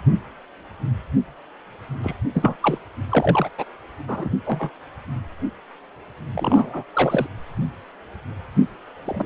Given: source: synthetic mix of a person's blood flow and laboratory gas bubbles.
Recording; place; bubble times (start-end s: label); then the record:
Doppler ultrasound of blood flow; precordium
2.03-2.16 s: bubbles
2.33-2.56 s: bubbles
2.62-2.79 s: bubbles
3.10-3.49 s: bubbles
3.58-3.64 s: bubbles
4.08-4.29 s: bubbles
4.46-4.69 s: bubbles
6.31-6.83 s: bubbles
6.93-7.27 s: bubbles
9.04-9.26 s: bubbles
From the record:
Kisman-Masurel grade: 232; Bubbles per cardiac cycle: several, 3 to 8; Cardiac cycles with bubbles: 50 to 99%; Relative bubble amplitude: moderate (0.250 to 0.450); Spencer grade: 3 (all of the cardiac periods contain showers or single bubble signals, but not dominating or overriding the cardiac motion signals); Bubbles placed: anywhere in the cardiac cycle